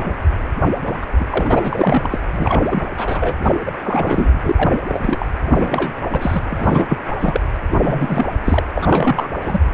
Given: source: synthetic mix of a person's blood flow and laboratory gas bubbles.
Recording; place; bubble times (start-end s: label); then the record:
Doppler ultrasound of blood flow; precordium
0.00-0.18 s: bubbles
0.84-0.97 s: bubbles
1.02-1.06 s: bubbles
1.20-1.25 s: bubbles
1.30-2.06 s: bubbles
2.10-2.19 s: bubbles
2.33-2.87 s: bubbles
2.97-3.32 s: bubbles
3.44-3.60 s: bubbles
3.66-3.71 s: bubbles
3.83-4.38 s: bubbles
4.42-4.99 s: bubbles
5.03-5.26 s: bubbles
5.45-5.92 s: bubbles
6.09-6.43 s: bubbles
6.50-6.98 s: bubbles
7.20-7.41 s: bubbles
7.71-8.26 s: bubbles
8.45-8.64 s: bubbles
8.75-9.29 s: bubbles
9.41-9.60 s: bubbles
From the record:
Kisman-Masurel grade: 342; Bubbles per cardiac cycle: rolling drumbeat, 9 or more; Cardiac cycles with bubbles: 100%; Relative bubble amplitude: moderate (0.250 to 0.450); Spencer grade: 3 (all of the cardiac periods contain showers or single bubble signals, but not dominating or overriding the cardiac motion signals); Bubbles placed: anywhere in the cardiac cycle